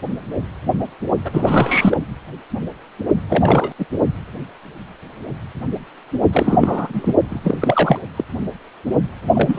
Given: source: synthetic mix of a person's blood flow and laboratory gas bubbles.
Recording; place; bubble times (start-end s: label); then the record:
Doppler ultrasound of blood flow; precordium
1.24-1.98 s: bubbles
3.29-3.72 s: bubbles
3.78-3.86 s: bubbles
6.32-7.14 s: bubbles
7.28-8.00 s: bubbles
8.16-8.24 s: bubbles
9.34-9.59 s: bubbles
From the record:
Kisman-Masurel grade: 333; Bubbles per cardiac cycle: rolling drumbeat, 9 or more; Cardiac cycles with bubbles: 50 to 99%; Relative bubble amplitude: loud (0.450 to 0.775); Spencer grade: 3 (all of the cardiac periods contain showers or single bubble signals, but not dominating or overriding the cardiac motion signals); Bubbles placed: only in the low amplitude regions of the cardiac cycle